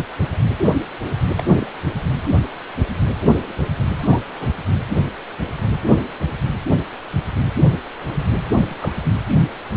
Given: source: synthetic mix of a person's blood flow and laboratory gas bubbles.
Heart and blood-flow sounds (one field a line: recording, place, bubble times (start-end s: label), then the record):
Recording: Doppler ultrasound of blood flow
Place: precordium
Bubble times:
1.35-1.44 s: bubbles
1.57-1.72 s: bubbles
4.00-4.19 s: bubbles
4.39-4.48 s: bubbles
8.65-9.09 s: bubbles
From the record:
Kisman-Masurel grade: 121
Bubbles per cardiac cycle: 1 to 2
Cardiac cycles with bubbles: 10 to 50%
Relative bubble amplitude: barely perceptible (0.100 to 0.250)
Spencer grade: 2 (many but less than half of the cardiac periods contain bubble signals, singularly or in groups)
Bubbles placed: anywhere in the cardiac cycle